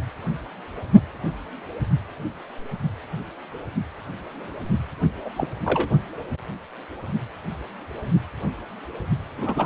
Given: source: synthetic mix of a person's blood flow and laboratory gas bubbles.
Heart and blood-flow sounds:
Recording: Doppler ultrasound of blood flow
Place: precordium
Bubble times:
5.25-5.29 s: bubbles
5.37-5.49 s: bubbles
5.65-5.89 s: bubbles
9.38-9.66 s: bubbles
From the record:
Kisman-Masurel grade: 222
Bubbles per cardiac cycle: several, 3 to 8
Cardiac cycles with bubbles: 10 to 50%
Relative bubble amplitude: moderate (0.250 to 0.450)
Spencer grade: 2 (many but less than half of the cardiac periods contain bubble signals, singularly or in groups)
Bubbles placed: only in the low amplitude regions of the cardiac cycle

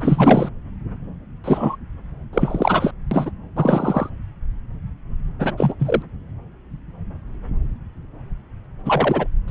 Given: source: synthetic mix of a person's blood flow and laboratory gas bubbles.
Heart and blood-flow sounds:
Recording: Doppler ultrasound of blood flow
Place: subclavian vein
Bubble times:
0.01-0.49 s: bubbles
1.44-1.76 s: bubbles
2.33-2.91 s: bubbles
3.11-3.31 s: bubbles
3.56-4.09 s: bubbles
5.39-5.54 s: bubbles
5.57-5.75 s: bubbles
5.79-6.02 s: bubbles
8.85-9.27 s: bubbles
9.48-9.50 s: bubbles
From the record:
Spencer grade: 2 (many but less than half of the cardiac periods contain bubble signals, singularly or in groups)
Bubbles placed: anywhere in the cardiac cycle

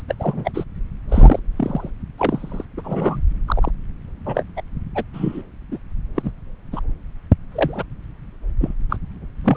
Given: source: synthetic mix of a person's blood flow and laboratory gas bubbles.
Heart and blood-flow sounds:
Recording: Doppler ultrasound of blood flow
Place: subclavian vein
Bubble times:
0.00-0.02 s: bubbles
0.08-0.14 s: bubbles
0.20-0.51 s: bubbles
0.54-0.64 s: bubbles
1.08-1.40 s: bubbles
1.56-1.91 s: bubbles
2.17-2.65 s: bubbles
2.77-3.21 s: bubbles
3.47-3.71 s: bubbles
4.25-4.43 s: bubbles
4.56-4.62 s: bubbles
4.95-5.04 s: bubbles
5.13-5.42 s: bubbles
5.71-5.78 s: bubbles
6.16-6.31 s: bubbles
6.72-6.80 s: bubbles
7.51-7.83 s: bubbles
8.60-8.73 s: bubbles
8.89-8.96 s: bubbles
9.44-9.57 s: bubbles
From the record:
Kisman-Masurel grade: 243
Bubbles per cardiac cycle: several, 3 to 8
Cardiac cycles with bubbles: 100%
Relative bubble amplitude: loud (0.450 to 0.775)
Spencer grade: 3 (all of the cardiac periods contain showers or single bubble signals, but not dominating or overriding the cardiac motion signals)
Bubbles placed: anywhere in the cardiac cycle

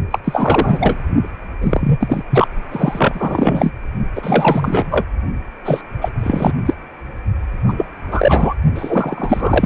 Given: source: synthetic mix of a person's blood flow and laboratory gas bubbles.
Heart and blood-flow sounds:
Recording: Doppler ultrasound of blood flow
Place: precordium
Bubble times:
0.10-0.19 s: bubbles
0.24-0.97 s: bubbles
1.60-2.22 s: bubbles
2.30-2.48 s: bubbles
2.71-3.71 s: bubbles
4.15-5.06 s: bubbles
5.65-5.82 s: bubbles
6.00-6.10 s: bubbles
6.18-6.53 s: bubbles
6.65-6.74 s: bubbles
7.68-7.73 s: bubbles
7.76-7.86 s: bubbles
8.11-8.54 s: bubbles
8.76-9.66 s: bubbles
From the record:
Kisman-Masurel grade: 343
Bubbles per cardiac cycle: rolling drumbeat, 9 or more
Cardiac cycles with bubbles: 100%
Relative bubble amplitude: loud (0.450 to 0.775)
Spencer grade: 3 (all of the cardiac periods contain showers or single bubble signals, but not dominating or overriding the cardiac motion signals)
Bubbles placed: only in the low amplitude regions of the cardiac cycle

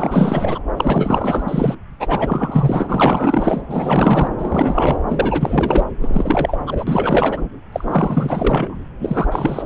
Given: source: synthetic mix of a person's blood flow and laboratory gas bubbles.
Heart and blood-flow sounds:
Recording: Doppler ultrasound of blood flow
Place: subclavian vein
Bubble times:
0.00-0.60 s: bubbles
0.77-1.75 s: bubbles
2.00-3.62 s: bubbles
3.69-4.28 s: bubbles
4.38-4.99 s: bubbles
5.08-5.85 s: bubbles
6.00-6.58 s: bubbles
6.66-7.42 s: bubbles
7.72-8.81 s: bubbles
9.00-9.27 s: bubbles
9.31-9.66 s: bubbles
From the record:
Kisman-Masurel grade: 444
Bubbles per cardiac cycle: continuous sound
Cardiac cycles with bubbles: 100%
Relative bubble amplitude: maximal (0.775 to 0.999)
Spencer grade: 4 (maximum detectable bubble signal sounding continuously throughout systole and diastole of every cardiac period, and overriding the amplitude of the normal cardiac signals)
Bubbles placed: anywhere in the cardiac cycle

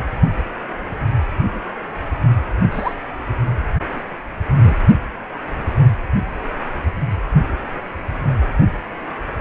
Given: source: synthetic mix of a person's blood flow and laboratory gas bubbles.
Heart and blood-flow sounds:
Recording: Doppler ultrasound of blood flow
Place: precordium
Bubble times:
2.72-2.93 s: bubbles
3.85-4.04 s: bubbles
4.55-4.76 s: bubbles
From the record:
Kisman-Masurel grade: 122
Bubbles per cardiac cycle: 1 to 2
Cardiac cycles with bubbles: 10 to 50%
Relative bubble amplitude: moderate (0.250 to 0.450)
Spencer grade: 2 (many but less than half of the cardiac periods contain bubble signals, singularly or in groups)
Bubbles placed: anywhere in the cardiac cycle

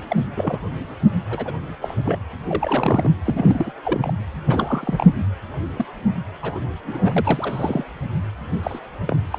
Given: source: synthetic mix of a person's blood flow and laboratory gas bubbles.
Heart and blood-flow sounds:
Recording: Doppler ultrasound of blood flow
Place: precordium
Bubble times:
0.10-0.16 s: bubbles
0.36-0.67 s: bubbles
1.29-1.52 s: bubbles
1.81-1.94 s: bubbles
2.04-2.18 s: bubbles
2.46-3.14 s: bubbles
3.25-3.72 s: bubbles
3.83-4.13 s: bubbles
4.44-5.05 s: bubbles
5.76-5.85 s: bubbles
6.42-6.52 s: bubbles
6.54-6.60 s: bubbles
6.84-7.84 s: bubbles
8.63-8.79 s: bubbles
9.07-9.16 s: bubbles
9.30-9.38 s: bubbles
From the record:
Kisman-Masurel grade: 242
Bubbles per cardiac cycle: several, 3 to 8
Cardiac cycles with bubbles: 100%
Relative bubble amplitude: moderate (0.250 to 0.450)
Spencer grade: 3 (all of the cardiac periods contain showers or single bubble signals, but not dominating or overriding the cardiac motion signals)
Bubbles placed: anywhere in the cardiac cycle

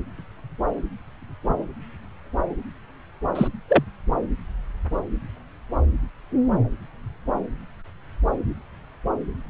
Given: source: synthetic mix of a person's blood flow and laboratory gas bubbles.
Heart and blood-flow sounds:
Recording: Doppler ultrasound of blood flow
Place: subclavian vein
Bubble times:
3.35-3.48 s: bubbles
3.68-3.84 s: bubbles
From the record:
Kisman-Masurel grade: 113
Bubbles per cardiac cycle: 1 to 2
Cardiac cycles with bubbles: 1 to 10%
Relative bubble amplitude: loud (0.450 to 0.775)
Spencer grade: 1 (occasional bubble signal discernible with the cardiac motion signal, with majority of cardiac periods free of bubbles)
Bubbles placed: anywhere in the cardiac cycle

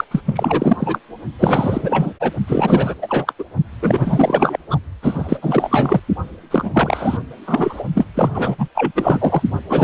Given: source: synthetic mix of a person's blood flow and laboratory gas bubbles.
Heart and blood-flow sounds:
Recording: Doppler ultrasound of blood flow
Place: precordium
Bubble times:
0.00-0.04 s: bubbles
0.11-0.21 s: bubbles
0.26-0.99 s: bubbles
1.39-2.14 s: bubbles
2.20-2.31 s: bubbles
2.47-2.95 s: bubbles
3.02-3.33 s: bubbles
3.39-3.44 s: bubbles
3.82-4.57 s: bubbles
4.70-4.79 s: bubbles
5.02-6.00 s: bubbles
6.51-6.71 s: bubbles
6.73-7.19 s: bubbles
7.46-7.83 s: bubbles
7.95-8.05 s: bubbles
8.14-8.29 s: bubbles
8.33-8.55 s: bubbles
8.58-8.68 s: bubbles
8.74-8.92 s: bubbles
8.95-9.42 s: bubbles
9.69-9.84 s: bubbles
From the record:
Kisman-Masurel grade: 444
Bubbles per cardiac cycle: continuous sound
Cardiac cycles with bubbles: 100%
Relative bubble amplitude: maximal (0.775 to 0.999)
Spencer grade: 4 (maximum detectable bubble signal sounding continuously throughout systole and diastole of every cardiac period, and overriding the amplitude of the normal cardiac signals)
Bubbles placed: only in the low amplitude regions of the cardiac cycle

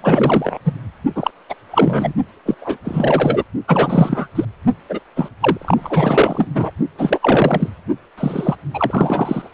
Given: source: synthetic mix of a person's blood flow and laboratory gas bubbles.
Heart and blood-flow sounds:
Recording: Doppler ultrasound of blood flow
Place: precordium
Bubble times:
0.02-0.58 s: bubbles
0.64-0.72 s: bubbles
1.15-1.31 s: bubbles
1.49-1.54 s: bubbles
1.71-2.12 s: bubbles
2.46-2.54 s: bubbles
2.61-2.76 s: bubbles
2.84-3.44 s: bubbles
3.67-4.28 s: bubbles
4.35-4.45 s: bubbles
4.89-5.00 s: bubbles
5.16-5.29 s: bubbles
5.40-6.47 s: bubbles
6.54-6.71 s: bubbles
6.98-7.19 s: bubbles
7.22-7.69 s: bubbles
8.17-8.55 s: bubbles
8.74-9.49 s: bubbles
From the record:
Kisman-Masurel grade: 343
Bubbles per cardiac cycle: rolling drumbeat, 9 or more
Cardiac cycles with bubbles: 100%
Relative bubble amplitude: loud (0.450 to 0.775)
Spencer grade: 3 (all of the cardiac periods contain showers or single bubble signals, but not dominating or overriding the cardiac motion signals)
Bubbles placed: only in the low amplitude regions of the cardiac cycle

